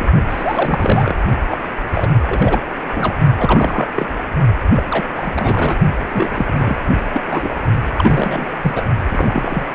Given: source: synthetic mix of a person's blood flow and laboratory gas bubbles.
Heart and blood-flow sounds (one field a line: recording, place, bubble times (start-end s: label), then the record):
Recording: Doppler ultrasound of blood flow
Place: precordium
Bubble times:
0.00-0.06 s: bubbles
0.29-1.15 s: bubbles
1.48-1.57 s: bubbles
1.91-2.09 s: bubbles
2.22-2.61 s: bubbles
2.94-3.15 s: bubbles
3.37-3.86 s: bubbles
3.95-4.13 s: bubbles
4.73-4.85 s: bubbles
4.90-5.06 s: bubbles
5.17-5.75 s: bubbles
6.09-6.84 s: bubbles
6.90-6.98 s: bubbles
7.14-7.55 s: bubbles
7.98-8.51 s: bubbles
8.62-8.82 s: bubbles
9.08-9.65 s: bubbles
From the record:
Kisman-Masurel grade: 342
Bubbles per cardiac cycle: rolling drumbeat, 9 or more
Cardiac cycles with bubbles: 100%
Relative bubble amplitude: moderate (0.250 to 0.450)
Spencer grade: 3 (all of the cardiac periods contain showers or single bubble signals, but not dominating or overriding the cardiac motion signals)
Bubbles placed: only in the low amplitude regions of the cardiac cycle